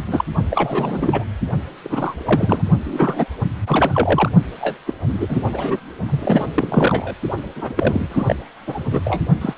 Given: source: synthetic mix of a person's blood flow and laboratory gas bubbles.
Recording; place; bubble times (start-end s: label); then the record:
Doppler ultrasound of blood flow; precordium
0.07-0.24 s: bubbles
0.49-1.24 s: bubbles
1.84-2.65 s: bubbles
2.85-3.26 s: bubbles
3.65-4.29 s: bubbles
4.60-4.78 s: bubbles
4.86-4.94 s: bubbles
5.07-5.42 s: bubbles
5.53-5.79 s: bubbles
6.08-6.46 s: bubbles
6.54-7.15 s: bubbles
7.56-7.73 s: bubbles
7.77-8.36 s: bubbles
8.66-8.84 s: bubbles
8.91-9.21 s: bubbles
9.41-9.54 s: bubbles
From the record:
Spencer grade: 3 (all of the cardiac periods contain showers or single bubble signals, but not dominating or overriding the cardiac motion signals); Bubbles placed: only in the low amplitude regions of the cardiac cycle